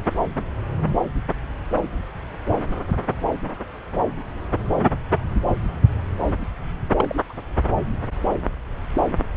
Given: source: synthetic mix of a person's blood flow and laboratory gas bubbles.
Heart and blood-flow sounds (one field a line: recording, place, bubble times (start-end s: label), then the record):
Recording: Doppler ultrasound of blood flow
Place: subclavian vein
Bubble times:
6.96-7.16 s: bubbles
7.29-7.33 s: bubbles
From the record:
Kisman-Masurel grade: 212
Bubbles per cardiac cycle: several, 3 to 8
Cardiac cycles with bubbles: 1 to 10%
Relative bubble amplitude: moderate (0.250 to 0.450)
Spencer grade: 1 (occasional bubble signal discernible with the cardiac motion signal, with majority of cardiac periods free of bubbles)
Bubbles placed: anywhere in the cardiac cycle